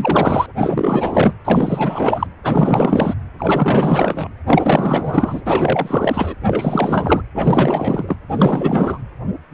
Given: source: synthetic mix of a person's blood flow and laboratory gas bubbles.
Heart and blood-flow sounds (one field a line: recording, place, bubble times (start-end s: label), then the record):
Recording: Doppler ultrasound of blood flow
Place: precordium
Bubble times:
0.00-0.46 s: bubbles
0.56-1.34 s: bubbles
1.44-2.27 s: bubbles
2.43-3.15 s: bubbles
3.38-4.28 s: bubbles
4.47-5.42 s: bubbles
5.44-6.34 s: bubbles
6.46-7.22 s: bubbles
7.34-8.16 s: bubbles
8.29-8.98 s: bubbles
From the record:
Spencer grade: 4 (maximum detectable bubble signal sounding continuously throughout systole and diastole of every cardiac period, and overriding the amplitude of the normal cardiac signals)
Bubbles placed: anywhere in the cardiac cycle